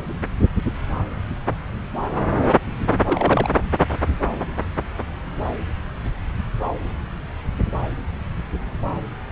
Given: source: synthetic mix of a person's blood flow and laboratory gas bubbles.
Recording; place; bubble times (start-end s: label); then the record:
Doppler ultrasound of blood flow; subclavian vein
3.04-3.50 s: bubbles
From the record:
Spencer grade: 1 (occasional bubble signal discernible with the cardiac motion signal, with majority of cardiac periods free of bubbles); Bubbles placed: anywhere in the cardiac cycle